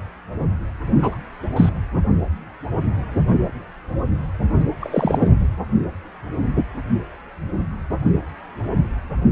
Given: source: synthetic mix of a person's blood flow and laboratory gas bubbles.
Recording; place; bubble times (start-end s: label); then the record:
Doppler ultrasound of blood flow; precordium
0.98-1.18 s: bubbles
1.56-1.69 s: bubbles
4.79-5.30 s: bubbles
From the record:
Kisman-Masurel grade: 123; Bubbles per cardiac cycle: 1 to 2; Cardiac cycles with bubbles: 10 to 50%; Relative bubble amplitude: loud (0.450 to 0.775); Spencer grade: 2 (many but less than half of the cardiac periods contain bubble signals, singularly or in groups); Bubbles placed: anywhere in the cardiac cycle